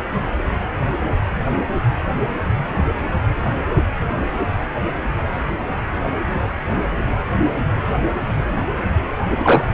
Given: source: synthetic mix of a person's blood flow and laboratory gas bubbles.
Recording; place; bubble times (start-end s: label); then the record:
Doppler ultrasound of blood flow; precordium
9.25-9.68 s: bubbles
From the record:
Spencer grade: 1 (occasional bubble signal discernible with the cardiac motion signal, with majority of cardiac periods free of bubbles); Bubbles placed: anywhere in the cardiac cycle